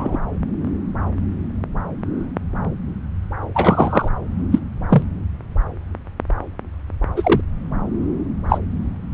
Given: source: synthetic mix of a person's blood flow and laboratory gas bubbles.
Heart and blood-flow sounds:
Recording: Doppler ultrasound of blood flow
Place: subclavian vein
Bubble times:
0.00-0.19 s: bubbles
3.54-4.08 s: bubbles
4.51-4.59 s: bubbles
4.89-5.02 s: bubbles
7.17-7.41 s: bubbles
8.49-8.58 s: bubbles
From the record:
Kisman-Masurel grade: 123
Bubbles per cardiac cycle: 1 to 2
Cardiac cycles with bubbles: 10 to 50%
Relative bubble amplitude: loud (0.450 to 0.775)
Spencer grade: 2 (many but less than half of the cardiac periods contain bubble signals, singularly or in groups)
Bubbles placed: anywhere in the cardiac cycle

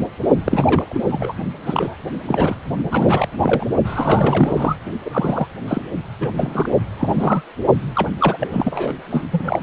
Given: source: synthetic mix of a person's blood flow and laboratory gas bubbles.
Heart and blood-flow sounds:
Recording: Doppler ultrasound of blood flow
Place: precordium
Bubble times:
0.45-1.00 s: bubbles
1.09-1.33 s: bubbles
1.66-1.96 s: bubbles
2.25-2.56 s: bubbles
2.91-3.28 s: bubbles
3.38-3.66 s: bubbles
3.84-4.76 s: bubbles
5.05-5.47 s: bubbles
5.67-5.81 s: bubbles
6.20-6.29 s: bubbles
6.37-6.75 s: bubbles
6.97-7.44 s: bubbles
7.95-8.09 s: bubbles
8.20-8.47 s: bubbles
8.53-8.94 s: bubbles
9.10-9.22 s: bubbles
9.32-9.62 s: bubbles
From the record:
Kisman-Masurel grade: 333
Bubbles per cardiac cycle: rolling drumbeat, 9 or more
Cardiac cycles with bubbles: 50 to 99%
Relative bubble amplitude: loud (0.450 to 0.775)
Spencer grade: 3 (all of the cardiac periods contain showers or single bubble signals, but not dominating or overriding the cardiac motion signals)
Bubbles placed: only in the low amplitude regions of the cardiac cycle

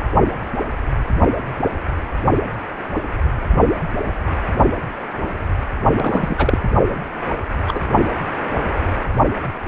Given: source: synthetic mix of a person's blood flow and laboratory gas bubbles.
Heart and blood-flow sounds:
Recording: Doppler ultrasound of blood flow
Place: precordium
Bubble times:
5.95-6.58 s: bubbles
6.88-7.00 s: bubbles
7.67-7.79 s: bubbles
From the record:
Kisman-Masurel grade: 213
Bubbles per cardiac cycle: several, 3 to 8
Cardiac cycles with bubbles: 1 to 10%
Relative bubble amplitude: loud (0.450 to 0.775)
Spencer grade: 1 (occasional bubble signal discernible with the cardiac motion signal, with majority of cardiac periods free of bubbles)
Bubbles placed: only in the low amplitude regions of the cardiac cycle

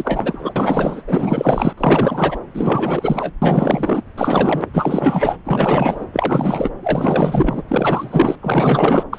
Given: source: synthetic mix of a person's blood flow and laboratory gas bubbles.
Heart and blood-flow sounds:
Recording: Doppler ultrasound of blood flow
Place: subclavian vein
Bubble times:
0.00-1.02 s: bubbles
1.07-1.73 s: bubbles
1.77-2.39 s: bubbles
2.54-3.31 s: bubbles
3.42-4.01 s: bubbles
4.17-4.65 s: bubbles
4.73-5.37 s: bubbles
5.45-6.04 s: bubbles
6.12-6.70 s: bubbles
6.83-7.64 s: bubbles
7.67-8.35 s: bubbles
8.41-9.03 s: bubbles
9.12-9.18 s: bubbles
From the record:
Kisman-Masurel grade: 444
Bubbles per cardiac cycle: continuous sound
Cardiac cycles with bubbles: 100%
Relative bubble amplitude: maximal (0.775 to 0.999)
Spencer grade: 4 (maximum detectable bubble signal sounding continuously throughout systole and diastole of every cardiac period, and overriding the amplitude of the normal cardiac signals)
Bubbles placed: anywhere in the cardiac cycle

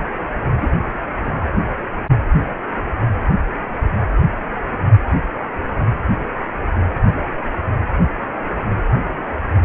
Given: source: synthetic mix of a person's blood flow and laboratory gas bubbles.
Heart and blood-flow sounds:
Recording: Doppler ultrasound of blood flow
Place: precordium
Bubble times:
0.60-0.71 s: bubbles
1.24-1.31 s: bubbles
From the record:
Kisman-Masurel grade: 111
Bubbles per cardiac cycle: 1 to 2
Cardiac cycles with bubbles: 1 to 10%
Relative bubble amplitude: barely perceptible (0.100 to 0.250)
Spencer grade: 1 (occasional bubble signal discernible with the cardiac motion signal, with majority of cardiac periods free of bubbles)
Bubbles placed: anywhere in the cardiac cycle

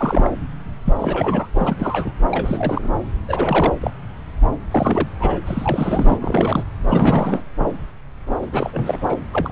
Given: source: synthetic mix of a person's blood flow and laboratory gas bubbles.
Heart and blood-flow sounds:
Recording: Doppler ultrasound of blood flow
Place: subclavian vein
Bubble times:
0.00-0.29 s: bubbles
0.85-0.94 s: bubbles
0.99-1.48 s: bubbles
1.54-1.76 s: bubbles
1.79-2.13 s: bubbles
2.31-2.89 s: bubbles
3.27-3.73 s: bubbles
3.81-3.91 s: bubbles
4.71-5.08 s: bubbles
5.20-5.42 s: bubbles
5.46-6.65 s: bubbles
6.86-7.44 s: bubbles
8.42-8.47 s: bubbles
8.52-8.98 s: bubbles
9.08-9.17 s: bubbles
9.32-9.52 s: bubbles
From the record:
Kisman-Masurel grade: 332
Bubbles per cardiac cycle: rolling drumbeat, 9 or more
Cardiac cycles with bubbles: 50 to 99%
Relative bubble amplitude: moderate (0.250 to 0.450)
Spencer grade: 3 (all of the cardiac periods contain showers or single bubble signals, but not dominating or overriding the cardiac motion signals)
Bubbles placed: anywhere in the cardiac cycle

